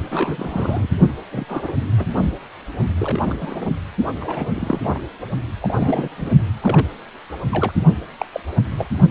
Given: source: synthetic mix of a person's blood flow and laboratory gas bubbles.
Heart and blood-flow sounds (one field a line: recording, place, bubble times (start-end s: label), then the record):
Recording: Doppler ultrasound of blood flow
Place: precordium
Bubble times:
0.00-0.88 s: bubbles
1.31-1.73 s: bubbles
1.98-2.33 s: bubbles
2.99-3.71 s: bubbles
4.20-4.50 s: bubbles
4.54-4.81 s: bubbles
4.83-5.00 s: bubbles
5.62-6.09 s: bubbles
6.17-6.30 s: bubbles
6.62-6.87 s: bubbles
7.51-7.72 s: bubbles
8.18-8.26 s: bubbles
8.32-8.40 s: bubbles
8.69-8.85 s: bubbles
From the record:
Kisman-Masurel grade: 232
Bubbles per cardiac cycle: several, 3 to 8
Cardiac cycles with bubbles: 50 to 99%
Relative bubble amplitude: moderate (0.250 to 0.450)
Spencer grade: 3 (all of the cardiac periods contain showers or single bubble signals, but not dominating or overriding the cardiac motion signals)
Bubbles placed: only in the low amplitude regions of the cardiac cycle